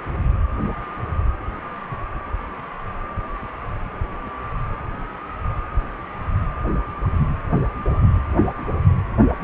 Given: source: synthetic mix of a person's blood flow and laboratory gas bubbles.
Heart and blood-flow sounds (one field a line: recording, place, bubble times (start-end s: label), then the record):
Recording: Doppler ultrasound of blood flow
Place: precordium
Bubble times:
no bubbles
From the record:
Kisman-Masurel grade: 000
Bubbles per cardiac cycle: 0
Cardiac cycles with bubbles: 0%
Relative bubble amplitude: no bubbles discernible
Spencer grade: 0 (complete lack of bubble signals)